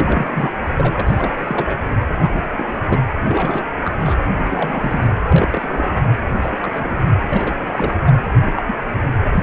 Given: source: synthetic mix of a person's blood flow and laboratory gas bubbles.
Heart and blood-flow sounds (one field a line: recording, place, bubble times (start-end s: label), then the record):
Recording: Doppler ultrasound of blood flow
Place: precordium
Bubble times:
0.00-0.49 s: bubbles
0.61-0.66 s: bubbles
0.76-1.02 s: bubbles
1.06-1.77 s: bubbles
2.17-2.42 s: bubbles
2.56-2.66 s: bubbles
2.88-2.98 s: bubbles
3.29-3.63 s: bubbles
3.84-3.94 s: bubbles
3.98-4.15 s: bubbles
4.38-5.09 s: bubbles
5.25-6.02 s: bubbles
6.36-6.57 s: bubbles
6.60-6.96 s: bubbles
7.08-7.12 s: bubbles
7.30-7.54 s: bubbles
7.68-7.94 s: bubbles
8.05-8.12 s: bubbles
8.44-8.62 s: bubbles
8.66-8.75 s: bubbles
9.31-9.43 s: bubbles
From the record:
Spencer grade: 3 (all of the cardiac periods contain showers or single bubble signals, but not dominating or overriding the cardiac motion signals)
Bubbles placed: anywhere in the cardiac cycle